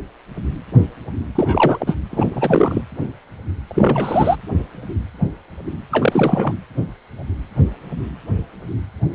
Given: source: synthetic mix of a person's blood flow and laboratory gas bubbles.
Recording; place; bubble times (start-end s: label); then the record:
Doppler ultrasound of blood flow; precordium
1.35-1.95 s: bubbles
2.11-2.26 s: bubbles
2.33-2.82 s: bubbles
3.67-4.36 s: bubbles
5.91-6.54 s: bubbles
From the record:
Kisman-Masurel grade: 223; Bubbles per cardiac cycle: several, 3 to 8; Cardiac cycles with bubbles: 10 to 50%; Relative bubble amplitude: loud (0.450 to 0.775); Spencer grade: 2 (many but less than half of the cardiac periods contain bubble signals, singularly or in groups); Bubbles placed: anywhere in the cardiac cycle